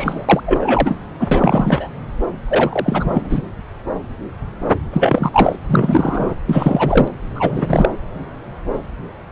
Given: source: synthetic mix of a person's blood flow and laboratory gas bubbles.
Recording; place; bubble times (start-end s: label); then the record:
Doppler ultrasound of blood flow; subclavian vein
0.00-0.26 s: bubbles
0.29-0.41 s: bubbles
0.45-0.94 s: bubbles
1.20-1.27 s: bubbles
1.31-1.90 s: bubbles
2.48-3.42 s: bubbles
4.92-5.55 s: bubbles
5.68-6.35 s: bubbles
6.46-7.08 s: bubbles
7.35-7.91 s: bubbles
From the record:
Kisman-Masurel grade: 333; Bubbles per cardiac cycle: rolling drumbeat, 9 or more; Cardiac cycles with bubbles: 50 to 99%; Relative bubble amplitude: loud (0.450 to 0.775); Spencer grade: 3 (all of the cardiac periods contain showers or single bubble signals, but not dominating or overriding the cardiac motion signals); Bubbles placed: anywhere in the cardiac cycle